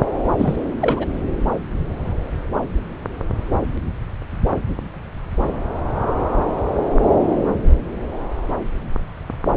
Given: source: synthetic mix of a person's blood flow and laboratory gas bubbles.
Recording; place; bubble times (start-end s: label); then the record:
Doppler ultrasound of blood flow; subclavian vein
0.38-0.58 s: bubbles
0.81-1.17 s: bubbles
From the record:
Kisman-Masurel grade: 212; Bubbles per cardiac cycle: several, 3 to 8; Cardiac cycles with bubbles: 1 to 10%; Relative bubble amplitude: moderate (0.250 to 0.450); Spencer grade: 1 (occasional bubble signal discernible with the cardiac motion signal, with majority of cardiac periods free of bubbles); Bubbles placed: anywhere in the cardiac cycle